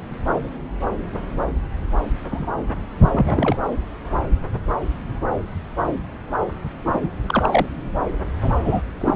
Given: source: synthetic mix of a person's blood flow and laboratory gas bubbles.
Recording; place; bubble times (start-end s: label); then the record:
Doppler ultrasound of blood flow; subclavian vein
2.30-2.46 s: bubbles
3.12-3.57 s: bubbles
6.93-7.00 s: bubbles
7.02-7.08 s: bubbles
7.27-7.66 s: bubbles
8.40-8.81 s: bubbles
9.00-9.16 s: bubbles
From the record:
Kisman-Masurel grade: 222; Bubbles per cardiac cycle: several, 3 to 8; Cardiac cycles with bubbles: 10 to 50%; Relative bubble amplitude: moderate (0.250 to 0.450); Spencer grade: 2 (many but less than half of the cardiac periods contain bubble signals, singularly or in groups); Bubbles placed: anywhere in the cardiac cycle